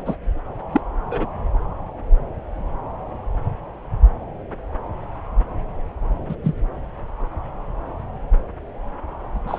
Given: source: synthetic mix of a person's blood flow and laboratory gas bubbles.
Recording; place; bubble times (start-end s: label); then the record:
Doppler ultrasound of blood flow; subclavian vein
0.00-0.03 s: bubbles
0.06-0.16 s: bubbles
0.72-0.81 s: bubbles
1.10-1.26 s: bubbles
6.29-6.35 s: bubbles
6.44-6.54 s: bubbles
9.47-9.58 s: bubbles
From the record:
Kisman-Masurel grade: 122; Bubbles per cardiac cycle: 1 to 2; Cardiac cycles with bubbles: 10 to 50%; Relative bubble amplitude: moderate (0.250 to 0.450); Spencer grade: 2 (many but less than half of the cardiac periods contain bubble signals, singularly or in groups); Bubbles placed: anywhere in the cardiac cycle